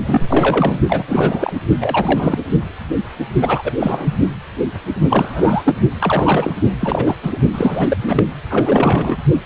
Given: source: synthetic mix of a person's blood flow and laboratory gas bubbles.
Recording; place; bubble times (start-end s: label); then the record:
Doppler ultrasound of blood flow; precordium
0.03-0.79 s: bubbles
0.88-1.04 s: bubbles
1.07-1.53 s: bubbles
1.80-2.38 s: bubbles
3.41-3.74 s: bubbles
3.79-4.16 s: bubbles
5.08-5.73 s: bubbles
6.00-6.56 s: bubbles
6.80-7.15 s: bubbles
7.22-7.38 s: bubbles
7.53-7.97 s: bubbles
8.07-8.25 s: bubbles
8.50-9.17 s: bubbles
From the record:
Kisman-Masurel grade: 332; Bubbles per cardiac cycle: rolling drumbeat, 9 or more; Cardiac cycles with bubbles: 50 to 99%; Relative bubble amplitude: moderate (0.250 to 0.450); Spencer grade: 3 (all of the cardiac periods contain showers or single bubble signals, but not dominating or overriding the cardiac motion signals); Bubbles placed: only in the low amplitude regions of the cardiac cycle